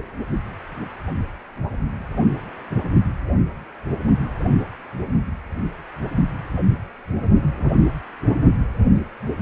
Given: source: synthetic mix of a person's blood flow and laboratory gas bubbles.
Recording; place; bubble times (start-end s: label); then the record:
Doppler ultrasound of blood flow; precordium
no bubbles
From the record:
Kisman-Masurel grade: 000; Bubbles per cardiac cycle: 0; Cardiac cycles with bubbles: 0%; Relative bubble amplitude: no bubbles discernible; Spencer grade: 0 (complete lack of bubble signals)